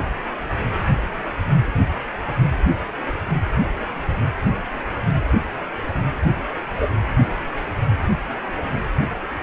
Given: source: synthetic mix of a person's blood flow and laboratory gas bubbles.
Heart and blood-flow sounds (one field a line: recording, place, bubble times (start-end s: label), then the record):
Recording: Doppler ultrasound of blood flow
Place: precordium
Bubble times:
6.76-6.90 s: bubbles
From the record:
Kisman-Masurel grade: 113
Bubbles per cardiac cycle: 1 to 2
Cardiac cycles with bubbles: 1 to 10%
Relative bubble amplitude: loud (0.450 to 0.775)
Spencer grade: 1 (occasional bubble signal discernible with the cardiac motion signal, with majority of cardiac periods free of bubbles)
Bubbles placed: anywhere in the cardiac cycle